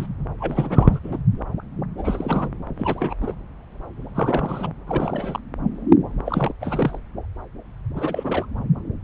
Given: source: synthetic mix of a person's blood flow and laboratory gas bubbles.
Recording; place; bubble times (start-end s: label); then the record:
Doppler ultrasound of blood flow; subclavian vein
0.00-0.08 s: bubbles
0.38-0.99 s: bubbles
1.04-1.20 s: bubbles
1.97-2.49 s: bubbles
2.75-3.18 s: bubbles
3.21-3.35 s: bubbles
4.15-4.72 s: bubbles
4.87-5.40 s: bubbles
6.25-6.53 s: bubbles
6.61-6.99 s: bubbles
7.95-8.46 s: bubbles
From the record:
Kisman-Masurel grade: 332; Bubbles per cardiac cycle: rolling drumbeat, 9 or more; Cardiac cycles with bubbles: 50 to 99%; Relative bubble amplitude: moderate (0.250 to 0.450); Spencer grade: 3 (all of the cardiac periods contain showers or single bubble signals, but not dominating or overriding the cardiac motion signals); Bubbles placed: anywhere in the cardiac cycle